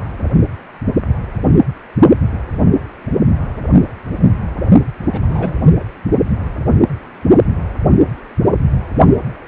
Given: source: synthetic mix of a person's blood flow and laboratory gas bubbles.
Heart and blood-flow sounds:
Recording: Doppler ultrasound of blood flow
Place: precordium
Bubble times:
5.06-5.55 s: bubbles
5.79-5.84 s: bubbles
From the record:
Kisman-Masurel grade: 222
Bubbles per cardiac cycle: several, 3 to 8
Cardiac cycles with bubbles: 10 to 50%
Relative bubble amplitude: moderate (0.250 to 0.450)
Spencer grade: 2 (many but less than half of the cardiac periods contain bubble signals, singularly or in groups)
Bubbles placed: only in the low amplitude regions of the cardiac cycle

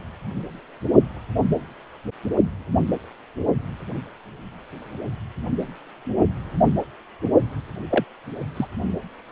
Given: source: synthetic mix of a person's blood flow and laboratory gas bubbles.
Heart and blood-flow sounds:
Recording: Doppler ultrasound of blood flow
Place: precordium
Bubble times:
7.90-8.04 s: bubbles
8.57-8.67 s: bubbles
From the record:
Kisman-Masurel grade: 122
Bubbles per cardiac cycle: 1 to 2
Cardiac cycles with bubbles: 10 to 50%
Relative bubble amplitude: moderate (0.250 to 0.450)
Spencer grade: 2 (many but less than half of the cardiac periods contain bubble signals, singularly or in groups)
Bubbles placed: only in the low amplitude regions of the cardiac cycle

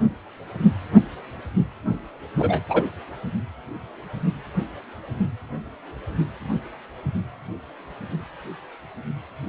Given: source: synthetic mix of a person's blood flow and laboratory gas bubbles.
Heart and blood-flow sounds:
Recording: Doppler ultrasound of blood flow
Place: precordium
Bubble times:
2.39-2.60 s: bubbles
2.69-2.83 s: bubbles
From the record:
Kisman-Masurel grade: 113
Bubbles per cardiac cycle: 1 to 2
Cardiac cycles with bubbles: 1 to 10%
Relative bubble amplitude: loud (0.450 to 0.775)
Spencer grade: 1 (occasional bubble signal discernible with the cardiac motion signal, with majority of cardiac periods free of bubbles)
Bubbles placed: only in the low amplitude regions of the cardiac cycle

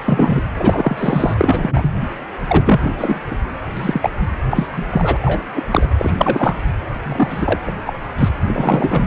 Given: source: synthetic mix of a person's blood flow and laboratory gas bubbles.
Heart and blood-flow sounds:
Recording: Doppler ultrasound of blood flow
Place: precordium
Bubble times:
0.06-0.42 s: bubbles
0.55-1.99 s: bubbles
2.47-3.20 s: bubbles
3.31-3.36 s: bubbles
3.77-4.10 s: bubbles
4.51-4.66 s: bubbles
4.72-4.84 s: bubbles
4.90-5.17 s: bubbles
5.22-5.43 s: bubbles
5.55-5.62 s: bubbles
5.69-5.88 s: bubbles
5.98-6.54 s: bubbles
7.03-7.58 s: bubbles
7.66-7.72 s: bubbles
7.86-7.97 s: bubbles
8.18-8.29 s: bubbles
8.46-9.07 s: bubbles
From the record:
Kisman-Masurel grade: 243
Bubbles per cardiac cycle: several, 3 to 8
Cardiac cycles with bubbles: 100%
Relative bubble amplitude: loud (0.450 to 0.775)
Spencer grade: 3 (all of the cardiac periods contain showers or single bubble signals, but not dominating or overriding the cardiac motion signals)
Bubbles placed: anywhere in the cardiac cycle

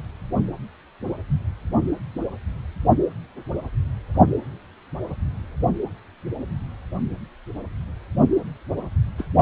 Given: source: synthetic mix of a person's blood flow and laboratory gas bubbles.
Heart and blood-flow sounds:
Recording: Doppler ultrasound of blood flow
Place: precordium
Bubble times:
9.18-9.26 s: bubbles
From the record:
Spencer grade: 1 (occasional bubble signal discernible with the cardiac motion signal, with majority of cardiac periods free of bubbles)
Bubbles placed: only in the low amplitude regions of the cardiac cycle

